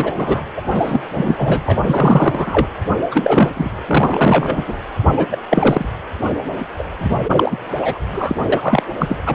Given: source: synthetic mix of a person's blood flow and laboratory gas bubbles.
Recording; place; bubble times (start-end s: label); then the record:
Doppler ultrasound of blood flow; precordium
0.00-0.12 s: bubbles
0.16-0.41 s: bubbles
0.56-0.62 s: bubbles
0.74-1.00 s: bubbles
1.14-1.35 s: bubbles
1.38-1.79 s: bubbles
1.82-2.68 s: bubbles
3.11-3.50 s: bubbles
3.56-3.71 s: bubbles
3.87-4.77 s: bubbles
5.10-5.25 s: bubbles
5.30-5.37 s: bubbles
5.50-5.88 s: bubbles
6.79-6.84 s: bubbles
6.98-7.19 s: bubbles
7.28-7.58 s: bubbles
7.82-7.98 s: bubbles
8.09-8.36 s: bubbles
8.52-8.82 s: bubbles
8.98-9.18 s: bubbles
9.26-9.35 s: bubbles
From the record:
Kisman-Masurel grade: 343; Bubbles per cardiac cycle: rolling drumbeat, 9 or more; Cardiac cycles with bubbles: 100%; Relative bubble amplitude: loud (0.450 to 0.775); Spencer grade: 3 (all of the cardiac periods contain showers or single bubble signals, but not dominating or overriding the cardiac motion signals); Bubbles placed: anywhere in the cardiac cycle